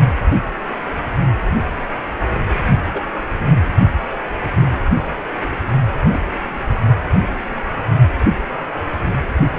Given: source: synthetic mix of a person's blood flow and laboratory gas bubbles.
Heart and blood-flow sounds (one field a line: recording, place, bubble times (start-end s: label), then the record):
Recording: Doppler ultrasound of blood flow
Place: precordium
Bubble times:
2.92-3.03 s: bubbles
4.10-4.17 s: bubbles
4.54-4.79 s: bubbles
6.13-6.21 s: bubbles
From the record:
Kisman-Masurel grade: 121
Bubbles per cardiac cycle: 1 to 2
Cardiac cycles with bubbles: 10 to 50%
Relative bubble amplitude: barely perceptible (0.100 to 0.250)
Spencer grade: 2 (many but less than half of the cardiac periods contain bubble signals, singularly or in groups)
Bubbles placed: only in the low amplitude regions of the cardiac cycle